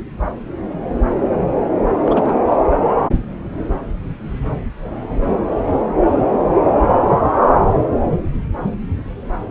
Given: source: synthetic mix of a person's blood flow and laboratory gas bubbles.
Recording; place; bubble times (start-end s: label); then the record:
Doppler ultrasound of blood flow; subclavian vein
2.04-2.38 s: bubbles
2.46-2.56 s: bubbles
From the record:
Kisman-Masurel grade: 212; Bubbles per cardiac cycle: several, 3 to 8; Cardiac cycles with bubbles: 1 to 10%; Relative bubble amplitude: moderate (0.250 to 0.450); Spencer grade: 1 (occasional bubble signal discernible with the cardiac motion signal, with majority of cardiac periods free of bubbles); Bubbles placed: anywhere in the cardiac cycle